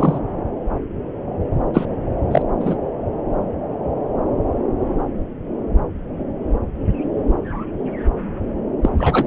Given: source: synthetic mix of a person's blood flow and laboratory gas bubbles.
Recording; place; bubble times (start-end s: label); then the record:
Doppler ultrasound of blood flow; subclavian vein
0.00-0.20 s: bubbles
1.73-1.85 s: bubbles
2.31-2.42 s: bubbles
2.60-2.77 s: bubbles
8.82-8.89 s: bubbles
8.97-9.27 s: bubbles
From the record:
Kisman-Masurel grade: 123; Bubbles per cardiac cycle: 1 to 2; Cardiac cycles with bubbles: 10 to 50%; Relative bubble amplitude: loud (0.450 to 0.775); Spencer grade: 2 (many but less than half of the cardiac periods contain bubble signals, singularly or in groups); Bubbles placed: anywhere in the cardiac cycle